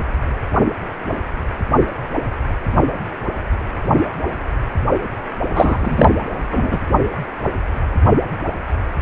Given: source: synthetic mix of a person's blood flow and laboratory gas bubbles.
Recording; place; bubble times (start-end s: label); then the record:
Doppler ultrasound of blood flow; precordium
5.50-6.09 s: bubbles
6.52-6.81 s: bubbles
From the record:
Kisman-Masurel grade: 213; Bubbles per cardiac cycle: several, 3 to 8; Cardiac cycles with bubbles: 1 to 10%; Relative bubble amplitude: loud (0.450 to 0.775); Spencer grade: 1 (occasional bubble signal discernible with the cardiac motion signal, with majority of cardiac periods free of bubbles); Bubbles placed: only in the low amplitude regions of the cardiac cycle